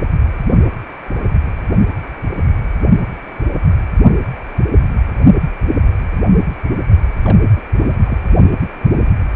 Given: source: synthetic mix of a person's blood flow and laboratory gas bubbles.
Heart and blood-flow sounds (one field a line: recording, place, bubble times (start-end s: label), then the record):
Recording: Doppler ultrasound of blood flow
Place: precordium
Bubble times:
7.25-7.39 s: bubbles
7.43-7.49 s: bubbles
7.56-7.62 s: bubbles
7.82-7.95 s: bubbles
8.04-8.19 s: bubbles
From the record:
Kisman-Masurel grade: 211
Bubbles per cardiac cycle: several, 3 to 8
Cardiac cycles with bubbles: 1 to 10%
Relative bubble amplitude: barely perceptible (0.100 to 0.250)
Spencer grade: 1 (occasional bubble signal discernible with the cardiac motion signal, with majority of cardiac periods free of bubbles)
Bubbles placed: anywhere in the cardiac cycle